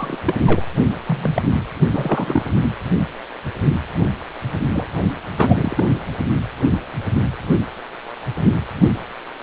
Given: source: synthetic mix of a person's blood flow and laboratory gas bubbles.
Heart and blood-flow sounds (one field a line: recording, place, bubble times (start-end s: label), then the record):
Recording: Doppler ultrasound of blood flow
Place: precordium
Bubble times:
0.00-0.18 s: bubbles
0.27-0.34 s: bubbles
0.46-0.64 s: bubbles
1.06-1.42 s: bubbles
1.91-2.52 s: bubbles
4.74-4.86 s: bubbles
5.38-6.01 s: bubbles
From the record:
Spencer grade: 2 (many but less than half of the cardiac periods contain bubble signals, singularly or in groups)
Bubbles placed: anywhere in the cardiac cycle